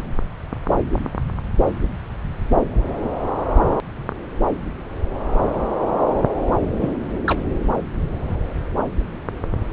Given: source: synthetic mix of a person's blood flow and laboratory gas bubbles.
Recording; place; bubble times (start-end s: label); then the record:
Doppler ultrasound of blood flow; subclavian vein
6.81-6.93 s: bubbles
7.26-7.39 s: bubbles
From the record:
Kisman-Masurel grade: 122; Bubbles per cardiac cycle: 1 to 2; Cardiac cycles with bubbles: 10 to 50%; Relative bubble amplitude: moderate (0.250 to 0.450); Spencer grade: 2 (many but less than half of the cardiac periods contain bubble signals, singularly or in groups); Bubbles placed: anywhere in the cardiac cycle